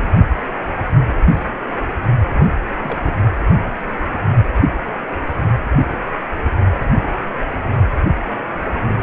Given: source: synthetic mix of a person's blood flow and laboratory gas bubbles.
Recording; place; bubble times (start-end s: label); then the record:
Doppler ultrasound of blood flow; precordium
2.33-2.46 s: bubbles
2.83-3.13 s: bubbles
From the record:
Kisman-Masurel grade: 221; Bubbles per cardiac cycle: several, 3 to 8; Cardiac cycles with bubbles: 10 to 50%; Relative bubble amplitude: barely perceptible (0.100 to 0.250); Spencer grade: 2 (many but less than half of the cardiac periods contain bubble signals, singularly or in groups); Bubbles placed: only in the low amplitude regions of the cardiac cycle